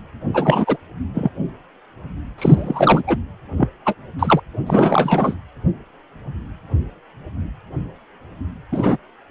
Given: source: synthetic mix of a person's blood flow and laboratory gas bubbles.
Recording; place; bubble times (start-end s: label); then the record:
Doppler ultrasound of blood flow; precordium
0.34-0.77 s: bubbles
1.14-1.30 s: bubbles
2.38-3.02 s: bubbles
3.07-3.17 s: bubbles
3.57-3.69 s: bubbles
3.85-3.94 s: bubbles
4.19-4.40 s: bubbles
4.67-5.35 s: bubbles
8.72-8.97 s: bubbles
From the record:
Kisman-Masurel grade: 233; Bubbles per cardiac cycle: several, 3 to 8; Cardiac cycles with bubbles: 50 to 99%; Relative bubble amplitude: loud (0.450 to 0.775); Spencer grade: 3 (all of the cardiac periods contain showers or single bubble signals, but not dominating or overriding the cardiac motion signals); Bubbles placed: anywhere in the cardiac cycle